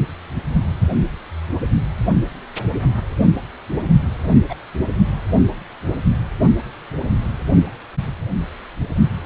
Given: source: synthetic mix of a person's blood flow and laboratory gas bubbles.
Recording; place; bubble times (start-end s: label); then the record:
Doppler ultrasound of blood flow; precordium
4.49-4.54 s: bubbles
From the record:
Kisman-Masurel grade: 112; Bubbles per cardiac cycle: 1 to 2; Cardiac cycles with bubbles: 1 to 10%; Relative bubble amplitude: moderate (0.250 to 0.450); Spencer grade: 1 (occasional bubble signal discernible with the cardiac motion signal, with majority of cardiac periods free of bubbles); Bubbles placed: only in the low amplitude regions of the cardiac cycle